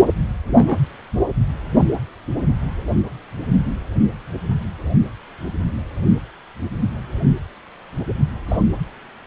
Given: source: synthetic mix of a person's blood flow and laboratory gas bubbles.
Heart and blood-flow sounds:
Doppler ultrasound of blood flow; precordium
0.47-0.78 s: bubbles
8.48-8.57 s: bubbles
From the record:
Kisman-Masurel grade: 122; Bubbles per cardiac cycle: 1 to 2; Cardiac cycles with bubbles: 10 to 50%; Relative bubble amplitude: moderate (0.250 to 0.450); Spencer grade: 2 (many but less than half of the cardiac periods contain bubble signals, singularly or in groups); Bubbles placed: anywhere in the cardiac cycle

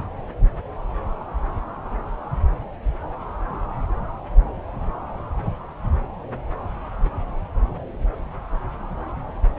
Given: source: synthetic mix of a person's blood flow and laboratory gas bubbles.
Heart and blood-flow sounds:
Doppler ultrasound of blood flow; subclavian vein
no bubbles
From the record:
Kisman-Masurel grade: 000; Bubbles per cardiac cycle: 0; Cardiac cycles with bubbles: 0%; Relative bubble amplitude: no bubbles discernible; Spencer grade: 0 (complete lack of bubble signals)

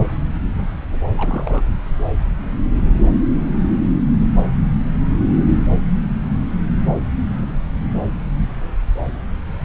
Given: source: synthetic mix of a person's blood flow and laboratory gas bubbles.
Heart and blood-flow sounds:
Doppler ultrasound of blood flow; subclavian vein
1.14-1.62 s: bubbles
From the record:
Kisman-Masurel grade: 211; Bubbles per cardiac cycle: several, 3 to 8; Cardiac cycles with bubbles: 1 to 10%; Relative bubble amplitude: barely perceptible (0.100 to 0.250); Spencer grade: 1 (occasional bubble signal discernible with the cardiac motion signal, with majority of cardiac periods free of bubbles); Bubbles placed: anywhere in the cardiac cycle

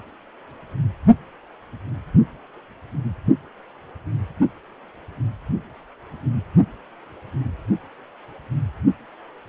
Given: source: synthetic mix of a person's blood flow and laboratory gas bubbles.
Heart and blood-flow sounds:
Doppler ultrasound of blood flow; precordium
no bubbles
From the record:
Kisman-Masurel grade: 000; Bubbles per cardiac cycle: 0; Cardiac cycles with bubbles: 0%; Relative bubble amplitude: no bubbles discernible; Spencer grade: 0 (complete lack of bubble signals)

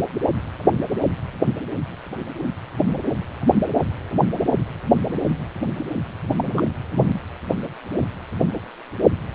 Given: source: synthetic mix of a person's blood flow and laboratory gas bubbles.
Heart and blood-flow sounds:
Doppler ultrasound of blood flow; precordium
6.35-6.62 s: bubbles
From the record:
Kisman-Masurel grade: 122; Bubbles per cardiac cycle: 1 to 2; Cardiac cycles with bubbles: 10 to 50%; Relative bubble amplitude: moderate (0.250 to 0.450); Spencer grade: 2 (many but less than half of the cardiac periods contain bubble signals, singularly or in groups); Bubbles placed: only in the low amplitude regions of the cardiac cycle

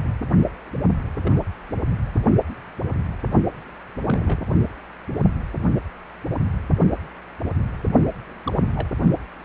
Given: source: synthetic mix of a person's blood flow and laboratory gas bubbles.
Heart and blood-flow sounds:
Doppler ultrasound of blood flow; precordium
1.25-1.43 s: bubbles
3.42-3.47 s: bubbles
4.01-4.42 s: bubbles
8.47-8.52 s: bubbles
8.75-8.88 s: bubbles
From the record:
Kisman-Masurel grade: 121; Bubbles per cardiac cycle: 1 to 2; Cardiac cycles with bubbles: 10 to 50%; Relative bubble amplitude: barely perceptible (0.100 to 0.250); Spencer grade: 2 (many but less than half of the cardiac periods contain bubble signals, singularly or in groups); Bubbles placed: only in the low amplitude regions of the cardiac cycle

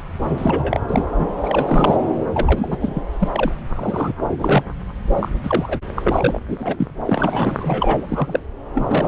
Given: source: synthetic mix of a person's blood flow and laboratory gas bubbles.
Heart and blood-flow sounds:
Doppler ultrasound of blood flow; subclavian vein
0.21-0.82 s: bubbles
0.88-1.34 s: bubbles
1.43-1.96 s: bubbles
2.34-3.00 s: bubbles
3.19-3.28 s: bubbles
3.32-3.56 s: bubbles
3.76-4.12 s: bubbles
4.30-4.63 s: bubbles
5.15-5.28 s: bubbles
5.43-5.79 s: bubbles
5.96-6.39 s: bubbles
6.47-6.88 s: bubbles
7.04-8.43 s: bubbles
8.75-9.08 s: bubbles
From the record:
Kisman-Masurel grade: 242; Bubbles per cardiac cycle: several, 3 to 8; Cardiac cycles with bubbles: 100%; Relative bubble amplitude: moderate (0.250 to 0.450); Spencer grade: 3 (all of the cardiac periods contain showers or single bubble signals, but not dominating or overriding the cardiac motion signals); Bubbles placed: anywhere in the cardiac cycle

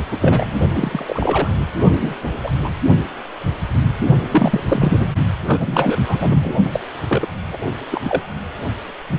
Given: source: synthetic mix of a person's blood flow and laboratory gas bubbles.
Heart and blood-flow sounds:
Doppler ultrasound of blood flow; precordium
0.12-0.60 s: bubbles
0.74-1.49 s: bubbles
1.93-2.15 s: bubbles
2.43-2.52 s: bubbles
2.62-2.69 s: bubbles
4.30-4.63 s: bubbles
4.68-4.99 s: bubbles
5.46-5.96 s: bubbles
6.08-6.54 s: bubbles
6.65-6.80 s: bubbles
7.08-7.26 s: bubbles
7.53-7.58 s: bubbles
7.92-8.22 s: bubbles
From the record:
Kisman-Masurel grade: 232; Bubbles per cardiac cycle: several, 3 to 8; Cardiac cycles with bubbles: 50 to 99%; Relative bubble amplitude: moderate (0.250 to 0.450); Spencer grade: 3 (all of the cardiac periods contain showers or single bubble signals, but not dominating or overriding the cardiac motion signals); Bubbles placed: only in the low amplitude regions of the cardiac cycle

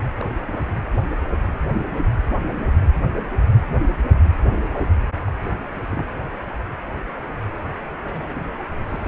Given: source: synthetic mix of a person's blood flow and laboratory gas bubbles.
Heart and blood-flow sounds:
Doppler ultrasound of blood flow; precordium
0.17-0.26 s: bubbles
0.47-0.74 s: bubbles
5.28-5.32 s: bubbles
5.42-5.55 s: bubbles
5.76-5.81 s: bubbles
5.89-6.08 s: bubbles
8.03-8.45 s: bubbles
8.88-9.08 s: bubbles
From the record:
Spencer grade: 2 (many but less than half of the cardiac periods contain bubble signals, singularly or in groups); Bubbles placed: anywhere in the cardiac cycle

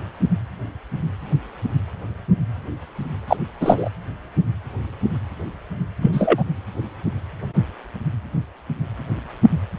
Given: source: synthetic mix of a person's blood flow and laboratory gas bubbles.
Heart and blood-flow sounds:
Doppler ultrasound of blood flow; precordium
3.28-3.37 s: bubbles
3.60-3.90 s: bubbles
6.01-6.43 s: bubbles
From the record:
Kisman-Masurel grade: 213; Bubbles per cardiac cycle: several, 3 to 8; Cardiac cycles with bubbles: 1 to 10%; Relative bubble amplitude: loud (0.450 to 0.775); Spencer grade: 1 (occasional bubble signal discernible with the cardiac motion signal, with majority of cardiac periods free of bubbles); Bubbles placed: anywhere in the cardiac cycle

